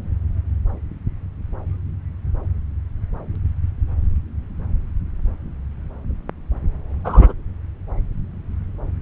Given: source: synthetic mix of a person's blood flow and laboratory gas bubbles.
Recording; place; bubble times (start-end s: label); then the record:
Doppler ultrasound of blood flow; subclavian vein
7.04-7.33 s: bubbles
From the record:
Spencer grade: 2 (many but less than half of the cardiac periods contain bubble signals, singularly or in groups); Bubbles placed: anywhere in the cardiac cycle